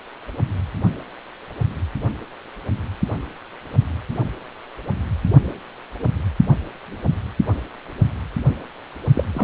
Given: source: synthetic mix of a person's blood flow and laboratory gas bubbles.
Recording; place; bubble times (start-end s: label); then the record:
Doppler ultrasound of blood flow; precordium
9.15-9.24 s: bubbles
9.34-9.44 s: bubbles
From the record:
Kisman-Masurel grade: 212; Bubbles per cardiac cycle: several, 3 to 8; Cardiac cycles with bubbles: 1 to 10%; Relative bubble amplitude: moderate (0.250 to 0.450); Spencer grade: 1 (occasional bubble signal discernible with the cardiac motion signal, with majority of cardiac periods free of bubbles); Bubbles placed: only in the low amplitude regions of the cardiac cycle